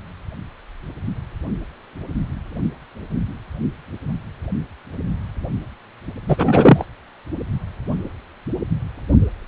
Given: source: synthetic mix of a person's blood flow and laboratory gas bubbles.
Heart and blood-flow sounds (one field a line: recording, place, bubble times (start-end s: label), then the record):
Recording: Doppler ultrasound of blood flow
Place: precordium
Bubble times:
6.28-6.85 s: bubbles
From the record:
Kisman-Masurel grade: 213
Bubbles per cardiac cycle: several, 3 to 8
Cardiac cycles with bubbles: 1 to 10%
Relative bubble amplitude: loud (0.450 to 0.775)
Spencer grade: 1 (occasional bubble signal discernible with the cardiac motion signal, with majority of cardiac periods free of bubbles)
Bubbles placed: anywhere in the cardiac cycle